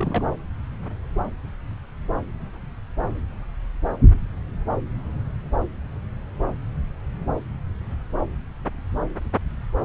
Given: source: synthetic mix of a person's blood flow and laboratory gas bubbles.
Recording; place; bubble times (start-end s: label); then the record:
Doppler ultrasound of blood flow; subclavian vein
0.00-0.25 s: bubbles
From the record:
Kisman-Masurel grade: 112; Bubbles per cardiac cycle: 1 to 2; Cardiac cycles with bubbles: 1 to 10%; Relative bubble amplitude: moderate (0.250 to 0.450); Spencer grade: 1 (occasional bubble signal discernible with the cardiac motion signal, with majority of cardiac periods free of bubbles); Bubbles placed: anywhere in the cardiac cycle